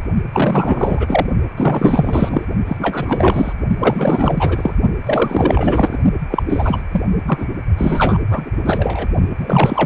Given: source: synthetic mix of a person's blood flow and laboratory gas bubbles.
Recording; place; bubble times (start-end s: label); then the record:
Doppler ultrasound of blood flow; precordium
0.33-1.26 s: bubbles
1.56-2.45 s: bubbles
2.67-3.53 s: bubbles
3.79-4.74 s: bubbles
5.04-5.99 s: bubbles
6.29-6.43 s: bubbles
6.48-6.82 s: bubbles
6.91-7.02 s: bubbles
7.26-7.47 s: bubbles
7.77-8.19 s: bubbles
8.29-8.50 s: bubbles
8.66-9.08 s: bubbles
9.38-9.86 s: bubbles
From the record:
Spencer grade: 4 (maximum detectable bubble signal sounding continuously throughout systole and diastole of every cardiac period, and overriding the amplitude of the normal cardiac signals); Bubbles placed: only in the low amplitude regions of the cardiac cycle